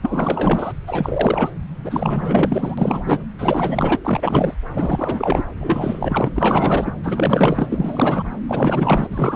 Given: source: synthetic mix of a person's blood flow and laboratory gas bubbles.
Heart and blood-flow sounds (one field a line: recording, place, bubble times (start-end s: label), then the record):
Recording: Doppler ultrasound of blood flow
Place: subclavian vein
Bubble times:
0.02-0.73 s: bubbles
0.87-1.50 s: bubbles
1.84-3.19 s: bubbles
3.38-3.99 s: bubbles
4.04-4.54 s: bubbles
4.74-5.43 s: bubbles
5.60-6.92 s: bubbles
7.03-7.67 s: bubbles
7.69-8.24 s: bubbles
8.48-9.07 s: bubbles
9.10-9.36 s: bubbles
From the record:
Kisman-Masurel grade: 444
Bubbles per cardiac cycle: continuous sound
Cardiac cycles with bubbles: 100%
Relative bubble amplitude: maximal (0.775 to 0.999)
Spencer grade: 4 (maximum detectable bubble signal sounding continuously throughout systole and diastole of every cardiac period, and overriding the amplitude of the normal cardiac signals)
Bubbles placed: anywhere in the cardiac cycle